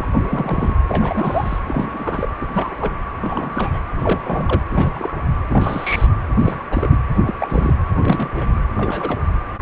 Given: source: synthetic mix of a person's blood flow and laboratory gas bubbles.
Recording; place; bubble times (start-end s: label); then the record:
Doppler ultrasound of blood flow; precordium
0.00-0.08 s: bubbles
0.12-0.22 s: bubbles
0.26-0.73 s: bubbles
0.89-1.60 s: bubbles
1.67-2.28 s: bubbles
2.40-2.46 s: bubbles
2.53-2.98 s: bubbles
3.21-3.79 s: bubbles
3.99-4.21 s: bubbles
4.24-4.61 s: bubbles
4.71-5.12 s: bubbles
5.50-6.07 s: bubbles
6.38-6.57 s: bubbles
6.71-6.97 s: bubbles
7.26-7.34 s: bubbles
7.38-7.73 s: bubbles
7.98-8.50 s: bubbles
8.76-9.18 s: bubbles
9.59-9.61 s: bubbles
From the record:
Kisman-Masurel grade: 242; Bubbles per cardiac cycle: several, 3 to 8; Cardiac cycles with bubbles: 100%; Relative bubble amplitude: moderate (0.250 to 0.450); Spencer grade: 3 (all of the cardiac periods contain showers or single bubble signals, but not dominating or overriding the cardiac motion signals); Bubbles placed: anywhere in the cardiac cycle